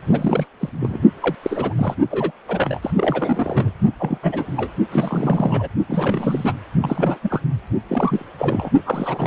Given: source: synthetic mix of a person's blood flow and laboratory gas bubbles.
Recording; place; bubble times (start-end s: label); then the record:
Doppler ultrasound of blood flow; precordium
0.05-0.46 s: bubbles
0.59-0.69 s: bubbles
0.80-1.02 s: bubbles
1.20-1.35 s: bubbles
1.43-1.74 s: bubbles
1.77-1.94 s: bubbles
2.10-2.31 s: bubbles
2.48-2.90 s: bubbles
2.96-3.70 s: bubbles
3.99-4.18 s: bubbles
4.23-4.70 s: bubbles
4.92-5.68 s: bubbles
5.89-6.53 s: bubbles
6.81-7.18 s: bubbles
7.23-7.41 s: bubbles
7.89-8.28 s: bubbles
8.38-8.70 s: bubbles
8.85-9.27 s: bubbles
From the record:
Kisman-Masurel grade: 342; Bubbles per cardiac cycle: rolling drumbeat, 9 or more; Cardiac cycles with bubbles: 100%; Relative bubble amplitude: moderate (0.250 to 0.450); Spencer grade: 3 (all of the cardiac periods contain showers or single bubble signals, but not dominating or overriding the cardiac motion signals); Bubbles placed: only in the low amplitude regions of the cardiac cycle